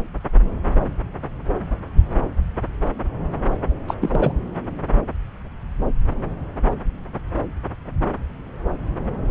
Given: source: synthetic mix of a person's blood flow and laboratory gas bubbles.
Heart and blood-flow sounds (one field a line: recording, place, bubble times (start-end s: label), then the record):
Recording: Doppler ultrasound of blood flow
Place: subclavian vein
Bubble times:
3.87-3.94 s: bubbles
4.01-4.32 s: bubbles
From the record:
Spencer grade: 1 (occasional bubble signal discernible with the cardiac motion signal, with majority of cardiac periods free of bubbles)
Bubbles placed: anywhere in the cardiac cycle